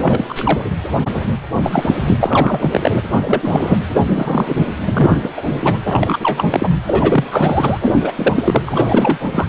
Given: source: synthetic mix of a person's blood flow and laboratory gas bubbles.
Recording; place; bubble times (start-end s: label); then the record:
Doppler ultrasound of blood flow; precordium
0.02-0.24 s: bubbles
0.29-0.70 s: bubbles
1.60-1.95 s: bubbles
2.00-2.92 s: bubbles
3.07-3.79 s: bubbles
3.93-4.71 s: bubbles
4.85-5.30 s: bubbles
5.37-5.42 s: bubbles
5.49-5.79 s: bubbles
5.84-6.68 s: bubbles
6.87-7.25 s: bubbles
7.29-7.77 s: bubbles
7.82-7.94 s: bubbles
8.01-8.12 s: bubbles
8.16-8.62 s: bubbles
8.66-9.18 s: bubbles
9.32-9.48 s: bubbles
From the record:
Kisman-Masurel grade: 343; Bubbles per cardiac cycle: rolling drumbeat, 9 or more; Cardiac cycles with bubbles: 100%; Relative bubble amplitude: loud (0.450 to 0.775); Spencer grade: 3 (all of the cardiac periods contain showers or single bubble signals, but not dominating or overriding the cardiac motion signals); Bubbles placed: anywhere in the cardiac cycle